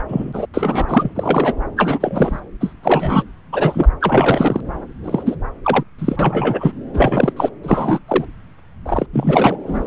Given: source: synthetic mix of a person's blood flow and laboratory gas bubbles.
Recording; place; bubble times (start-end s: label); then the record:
Doppler ultrasound of blood flow; subclavian vein
0.00-0.02 s: bubbles
0.08-0.47 s: bubbles
0.54-0.85 s: bubbles
0.88-1.09 s: bubbles
1.15-1.55 s: bubbles
1.76-2.40 s: bubbles
2.60-2.73 s: bubbles
2.83-3.23 s: bubbles
3.52-3.88 s: bubbles
4.00-4.60 s: bubbles
5.04-5.35 s: bubbles
5.64-5.83 s: bubbles
5.99-6.17 s: bubbles
6.19-6.72 s: bubbles
6.93-7.33 s: bubbles
7.36-7.50 s: bubbles
7.63-7.99 s: bubbles
8.07-8.25 s: bubbles
8.86-9.06 s: bubbles
9.12-9.57 s: bubbles
9.66-9.87 s: bubbles
From the record:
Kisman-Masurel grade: 243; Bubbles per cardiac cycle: several, 3 to 8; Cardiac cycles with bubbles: 100%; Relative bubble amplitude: loud (0.450 to 0.775); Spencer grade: 3 (all of the cardiac periods contain showers or single bubble signals, but not dominating or overriding the cardiac motion signals); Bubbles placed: anywhere in the cardiac cycle